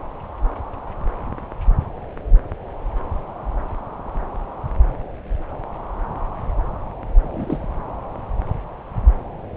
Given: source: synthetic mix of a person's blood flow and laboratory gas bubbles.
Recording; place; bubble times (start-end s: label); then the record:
Doppler ultrasound of blood flow; subclavian vein
7.22-7.65 s: bubbles
From the record:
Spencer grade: 1 (occasional bubble signal discernible with the cardiac motion signal, with majority of cardiac periods free of bubbles); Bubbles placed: anywhere in the cardiac cycle